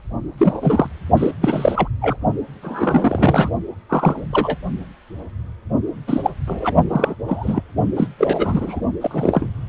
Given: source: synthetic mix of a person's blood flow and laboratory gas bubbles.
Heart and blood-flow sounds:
Doppler ultrasound of blood flow; precordium
0.38-0.86 s: bubbles
1.17-1.31 s: bubbles
1.42-1.88 s: bubbles
2.01-2.17 s: bubbles
2.62-3.50 s: bubbles
3.89-4.27 s: bubbles
4.33-4.57 s: bubbles
6.07-6.30 s: bubbles
6.47-6.75 s: bubbles
6.89-7.15 s: bubbles
7.28-7.62 s: bubbles
7.96-8.07 s: bubbles
8.17-8.80 s: bubbles
9.00-9.48 s: bubbles
From the record:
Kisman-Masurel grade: 233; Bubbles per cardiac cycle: several, 3 to 8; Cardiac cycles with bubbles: 50 to 99%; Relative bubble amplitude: loud (0.450 to 0.775); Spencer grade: 3 (all of the cardiac periods contain showers or single bubble signals, but not dominating or overriding the cardiac motion signals); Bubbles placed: only in the low amplitude regions of the cardiac cycle

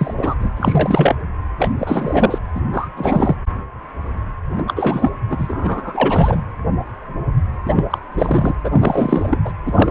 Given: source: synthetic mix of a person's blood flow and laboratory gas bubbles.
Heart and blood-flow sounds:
Doppler ultrasound of blood flow; precordium
0.00-0.14 s: bubbles
0.17-0.35 s: bubbles
0.40-0.50 s: bubbles
0.56-1.16 s: bubbles
1.57-1.70 s: bubbles
1.78-2.38 s: bubbles
2.54-2.61 s: bubbles
2.73-2.88 s: bubbles
2.96-3.36 s: bubbles
4.58-4.62 s: bubbles
4.67-5.11 s: bubbles
5.29-6.43 s: bubbles
7.66-7.85 s: bubbles
7.90-7.98 s: bubbles
8.11-8.55 s: bubbles
8.63-9.38 s: bubbles
9.45-9.52 s: bubbles
9.65-9.91 s: bubbles
From the record:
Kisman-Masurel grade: 333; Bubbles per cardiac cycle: rolling drumbeat, 9 or more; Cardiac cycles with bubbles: 50 to 99%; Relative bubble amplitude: loud (0.450 to 0.775); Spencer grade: 3 (all of the cardiac periods contain showers or single bubble signals, but not dominating or overriding the cardiac motion signals); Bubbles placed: anywhere in the cardiac cycle

